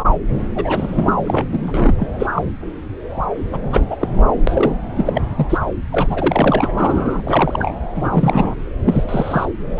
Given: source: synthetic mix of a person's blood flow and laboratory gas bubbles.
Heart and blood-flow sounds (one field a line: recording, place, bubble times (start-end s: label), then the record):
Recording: Doppler ultrasound of blood flow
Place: subclavian vein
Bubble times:
0.55-1.15 s: bubbles
1.26-1.45 s: bubbles
1.51-1.93 s: bubbles
1.97-2.07 s: bubbles
2.19-2.27 s: bubbles
2.35-2.43 s: bubbles
3.52-3.59 s: bubbles
3.71-3.85 s: bubbles
3.90-3.96 s: bubbles
4.00-4.09 s: bubbles
4.15-4.23 s: bubbles
4.47-4.74 s: bubbles
4.96-5.10 s: bubbles
5.14-5.22 s: bubbles
5.36-5.47 s: bubbles
5.50-5.58 s: bubbles
5.92-6.71 s: bubbles
6.78-7.74 s: bubbles
7.96-8.54 s: bubbles
8.85-9.46 s: bubbles
9.73-9.80 s: bubbles
From the record:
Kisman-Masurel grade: 233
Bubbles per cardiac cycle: several, 3 to 8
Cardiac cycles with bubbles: 50 to 99%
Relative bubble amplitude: loud (0.450 to 0.775)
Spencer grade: 3 (all of the cardiac periods contain showers or single bubble signals, but not dominating or overriding the cardiac motion signals)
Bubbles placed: anywhere in the cardiac cycle